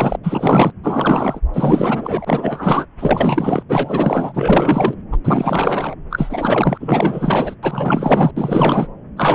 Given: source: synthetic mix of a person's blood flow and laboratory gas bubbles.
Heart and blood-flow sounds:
Doppler ultrasound of blood flow; subclavian vein
0.00-0.16 s: bubbles
0.23-0.72 s: bubbles
0.83-1.40 s: bubbles
1.53-2.86 s: bubbles
2.99-3.62 s: bubbles
3.69-4.95 s: bubbles
5.11-5.17 s: bubbles
5.24-5.95 s: bubbles
6.10-7.55 s: bubbles
7.62-8.31 s: bubbles
8.37-8.87 s: bubbles
9.17-9.35 s: bubbles
From the record:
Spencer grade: 4 (maximum detectable bubble signal sounding continuously throughout systole and diastole of every cardiac period, and overriding the amplitude of the normal cardiac signals); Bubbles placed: anywhere in the cardiac cycle

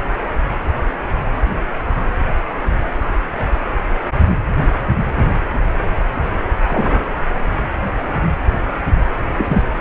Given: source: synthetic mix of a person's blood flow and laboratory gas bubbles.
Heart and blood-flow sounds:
Doppler ultrasound of blood flow; precordium
6.67-7.01 s: bubbles
9.38-9.62 s: bubbles
From the record:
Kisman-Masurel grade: 123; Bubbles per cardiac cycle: 1 to 2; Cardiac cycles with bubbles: 10 to 50%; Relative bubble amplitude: loud (0.450 to 0.775); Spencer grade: 2 (many but less than half of the cardiac periods contain bubble signals, singularly or in groups); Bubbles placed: anywhere in the cardiac cycle

